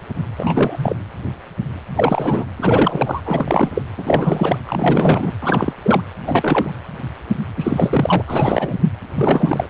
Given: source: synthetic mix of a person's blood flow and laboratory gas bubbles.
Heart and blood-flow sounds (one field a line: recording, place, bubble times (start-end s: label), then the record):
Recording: Doppler ultrasound of blood flow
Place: precordium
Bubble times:
0.38-0.96 s: bubbles
1.96-2.48 s: bubbles
2.56-3.21 s: bubbles
3.26-3.70 s: bubbles
3.75-3.82 s: bubbles
3.97-4.57 s: bubbles
4.67-5.31 s: bubbles
5.41-5.73 s: bubbles
5.83-6.01 s: bubbles
6.26-6.78 s: bubbles
7.57-8.23 s: bubbles
8.27-8.79 s: bubbles
9.15-9.67 s: bubbles
From the record:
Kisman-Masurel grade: 332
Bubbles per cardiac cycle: rolling drumbeat, 9 or more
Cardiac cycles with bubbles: 50 to 99%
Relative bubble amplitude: moderate (0.250 to 0.450)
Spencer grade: 3 (all of the cardiac periods contain showers or single bubble signals, but not dominating or overriding the cardiac motion signals)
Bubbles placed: anywhere in the cardiac cycle